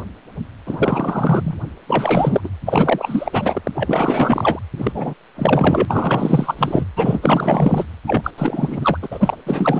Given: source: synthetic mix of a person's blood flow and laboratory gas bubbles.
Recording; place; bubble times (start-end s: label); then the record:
Doppler ultrasound of blood flow; precordium
0.66-1.55 s: bubbles
1.88-2.49 s: bubbles
2.65-3.61 s: bubbles
3.64-3.72 s: bubbles
3.74-4.59 s: bubbles
4.77-5.14 s: bubbles
5.35-6.84 s: bubbles
6.96-7.85 s: bubbles
8.07-8.30 s: bubbles
8.38-8.98 s: bubbles
9.02-9.09 s: bubbles
9.11-9.37 s: bubbles
9.46-9.79 s: bubbles
From the record:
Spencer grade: 4 (maximum detectable bubble signal sounding continuously throughout systole and diastole of every cardiac period, and overriding the amplitude of the normal cardiac signals); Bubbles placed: anywhere in the cardiac cycle